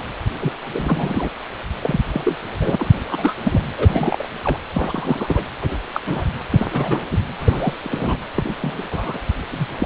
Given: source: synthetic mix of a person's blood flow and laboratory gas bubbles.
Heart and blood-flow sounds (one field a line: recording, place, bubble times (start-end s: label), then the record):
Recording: Doppler ultrasound of blood flow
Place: precordium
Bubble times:
0.00-0.02 s: bubbles
0.40-0.53 s: bubbles
0.65-1.29 s: bubbles
1.82-2.00 s: bubbles
2.12-2.35 s: bubbles
2.46-2.75 s: bubbles
2.78-2.91 s: bubbles
3.07-3.33 s: bubbles
3.43-3.62 s: bubbles
3.77-4.29 s: bubbles
4.44-4.58 s: bubbles
4.74-5.45 s: bubbles
5.61-5.78 s: bubbles
5.95-6.00 s: bubbles
6.07-6.25 s: bubbles
6.52-6.68 s: bubbles
6.71-7.01 s: bubbles
7.11-7.19 s: bubbles
7.39-7.74 s: bubbles
7.83-8.26 s: bubbles
8.35-8.55 s: bubbles
8.61-8.83 s: bubbles
8.91-9.19 s: bubbles
9.51-9.67 s: bubbles
9.79-9.86 s: bubbles
From the record:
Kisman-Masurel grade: 232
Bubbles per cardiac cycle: several, 3 to 8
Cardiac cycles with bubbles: 50 to 99%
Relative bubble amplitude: moderate (0.250 to 0.450)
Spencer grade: 3 (all of the cardiac periods contain showers or single bubble signals, but not dominating or overriding the cardiac motion signals)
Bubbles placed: anywhere in the cardiac cycle